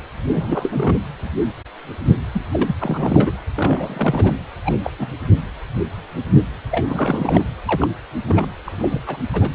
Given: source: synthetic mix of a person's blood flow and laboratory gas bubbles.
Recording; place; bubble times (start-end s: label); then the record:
Doppler ultrasound of blood flow; precordium
0.31-0.94 s: bubbles
2.33-2.43 s: bubbles
2.53-2.76 s: bubbles
2.79-3.32 s: bubbles
3.54-4.38 s: bubbles
4.65-4.76 s: bubbles
4.83-4.90 s: bubbles
4.99-5.14 s: bubbles
6.71-6.86 s: bubbles
6.88-7.43 s: bubbles
7.65-7.87 s: bubbles
8.28-8.46 s: bubbles
8.65-9.01 s: bubbles
9.06-9.17 s: bubbles
9.33-9.51 s: bubbles
From the record:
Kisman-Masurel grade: 232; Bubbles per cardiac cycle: several, 3 to 8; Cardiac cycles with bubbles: 50 to 99%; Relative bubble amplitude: moderate (0.250 to 0.450); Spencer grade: 3 (all of the cardiac periods contain showers or single bubble signals, but not dominating or overriding the cardiac motion signals); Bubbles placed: anywhere in the cardiac cycle